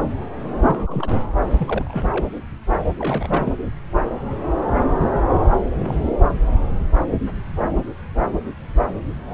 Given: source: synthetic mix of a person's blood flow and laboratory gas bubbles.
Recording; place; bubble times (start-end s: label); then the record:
Doppler ultrasound of blood flow; subclavian vein
0.68-1.20 s: bubbles
1.56-2.08 s: bubbles
2.12-2.25 s: bubbles
2.99-3.53 s: bubbles
5.72-6.15 s: bubbles
From the record:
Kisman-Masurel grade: 221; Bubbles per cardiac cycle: several, 3 to 8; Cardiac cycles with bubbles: 10 to 50%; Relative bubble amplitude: barely perceptible (0.100 to 0.250); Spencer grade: 2 (many but less than half of the cardiac periods contain bubble signals, singularly or in groups); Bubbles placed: anywhere in the cardiac cycle